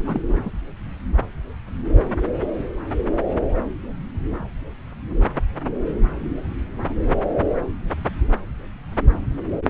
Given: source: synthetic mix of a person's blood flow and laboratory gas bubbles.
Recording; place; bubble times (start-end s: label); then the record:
Doppler ultrasound of blood flow; subclavian vein
0.07-0.21 s: bubbles
0.29-0.51 s: bubbles
From the record:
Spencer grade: 1 (occasional bubble signal discernible with the cardiac motion signal, with majority of cardiac periods free of bubbles); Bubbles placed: anywhere in the cardiac cycle